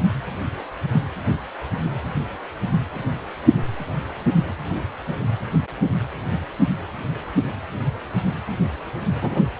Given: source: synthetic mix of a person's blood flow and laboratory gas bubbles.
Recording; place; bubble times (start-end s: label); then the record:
Doppler ultrasound of blood flow; precordium
9.21-9.42 s: bubbles
From the record:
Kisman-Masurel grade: 112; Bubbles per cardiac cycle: 1 to 2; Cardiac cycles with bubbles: 1 to 10%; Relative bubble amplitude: moderate (0.250 to 0.450); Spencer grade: 1 (occasional bubble signal discernible with the cardiac motion signal, with majority of cardiac periods free of bubbles); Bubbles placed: anywhere in the cardiac cycle